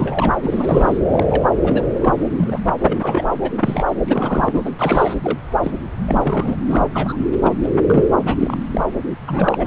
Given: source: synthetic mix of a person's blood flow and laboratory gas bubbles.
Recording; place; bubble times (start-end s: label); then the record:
Doppler ultrasound of blood flow; subclavian vein
0.00-0.36 s: bubbles
0.42-0.97 s: bubbles
1.11-1.26 s: bubbles
1.28-1.43 s: bubbles
1.64-1.86 s: bubbles
2.00-2.14 s: bubbles
2.38-2.59 s: bubbles
2.83-3.32 s: bubbles
3.42-3.51 s: bubbles
3.61-3.84 s: bubbles
4.06-4.62 s: bubbles
4.65-4.70 s: bubbles
4.78-5.15 s: bubbles
5.24-5.38 s: bubbles
5.62-5.71 s: bubbles
6.07-6.56 s: bubbles
6.67-7.21 s: bubbles
7.43-7.54 s: bubbles
7.63-7.72 s: bubbles
7.87-8.12 s: bubbles
8.25-8.35 s: bubbles
8.40-8.57 s: bubbles
8.72-8.81 s: bubbles
9.27-9.67 s: bubbles
From the record:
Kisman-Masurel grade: 242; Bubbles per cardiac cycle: several, 3 to 8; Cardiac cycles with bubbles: 100%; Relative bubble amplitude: moderate (0.250 to 0.450); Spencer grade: 3 (all of the cardiac periods contain showers or single bubble signals, but not dominating or overriding the cardiac motion signals); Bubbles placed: anywhere in the cardiac cycle